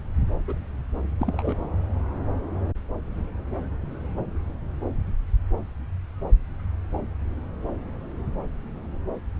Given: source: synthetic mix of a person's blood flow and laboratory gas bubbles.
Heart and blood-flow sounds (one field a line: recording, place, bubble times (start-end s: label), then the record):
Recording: Doppler ultrasound of blood flow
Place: subclavian vein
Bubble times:
0.48-0.65 s: bubbles
1.19-1.55 s: bubbles
From the record:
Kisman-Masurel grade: 122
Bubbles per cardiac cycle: 1 to 2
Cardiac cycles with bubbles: 10 to 50%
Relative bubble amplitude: moderate (0.250 to 0.450)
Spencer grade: 2 (many but less than half of the cardiac periods contain bubble signals, singularly or in groups)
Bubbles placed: anywhere in the cardiac cycle